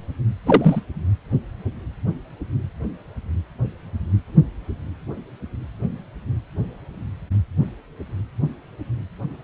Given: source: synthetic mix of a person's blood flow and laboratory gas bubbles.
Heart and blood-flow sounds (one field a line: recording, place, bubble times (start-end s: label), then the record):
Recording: Doppler ultrasound of blood flow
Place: precordium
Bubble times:
0.45-0.80 s: bubbles
From the record:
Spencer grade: 2 (many but less than half of the cardiac periods contain bubble signals, singularly or in groups)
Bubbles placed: anywhere in the cardiac cycle